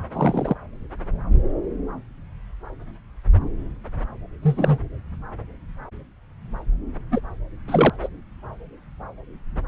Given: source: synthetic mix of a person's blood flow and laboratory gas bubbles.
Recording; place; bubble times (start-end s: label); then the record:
Doppler ultrasound of blood flow; subclavian vein
0.14-0.54 s: bubbles
4.42-4.79 s: bubbles
7.11-7.20 s: bubbles
7.67-7.90 s: bubbles
8.02-8.08 s: bubbles
From the record:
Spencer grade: 2 (many but less than half of the cardiac periods contain bubble signals, singularly or in groups); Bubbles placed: anywhere in the cardiac cycle